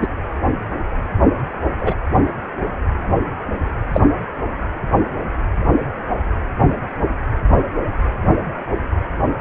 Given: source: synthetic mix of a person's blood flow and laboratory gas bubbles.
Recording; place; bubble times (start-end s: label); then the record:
Doppler ultrasound of blood flow; precordium
0.01-0.08 s: bubbles
1.80-1.94 s: bubbles
3.93-4.01 s: bubbles
From the record:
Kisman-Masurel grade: 123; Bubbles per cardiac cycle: 1 to 2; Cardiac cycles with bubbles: 10 to 50%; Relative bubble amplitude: loud (0.450 to 0.775); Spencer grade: 2 (many but less than half of the cardiac periods contain bubble signals, singularly or in groups); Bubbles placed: anywhere in the cardiac cycle